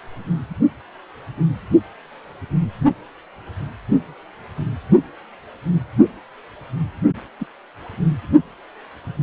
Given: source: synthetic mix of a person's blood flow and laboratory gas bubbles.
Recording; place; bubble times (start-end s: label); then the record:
Doppler ultrasound of blood flow; precordium
7.39-7.46 s: bubbles
From the record:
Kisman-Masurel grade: 121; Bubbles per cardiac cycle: 1 to 2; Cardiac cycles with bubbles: 10 to 50%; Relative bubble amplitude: barely perceptible (0.100 to 0.250); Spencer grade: 2 (many but less than half of the cardiac periods contain bubble signals, singularly or in groups); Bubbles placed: only in the low amplitude regions of the cardiac cycle